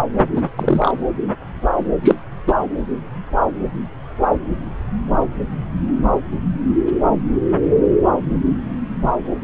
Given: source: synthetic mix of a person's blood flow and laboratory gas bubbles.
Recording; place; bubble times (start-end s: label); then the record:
Doppler ultrasound of blood flow; subclavian vein
0.35-0.41 s: bubbles
0.56-0.92 s: bubbles
2.04-2.15 s: bubbles
2.47-2.53 s: bubbles
From the record:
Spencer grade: 2 (many but less than half of the cardiac periods contain bubble signals, singularly or in groups); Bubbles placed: anywhere in the cardiac cycle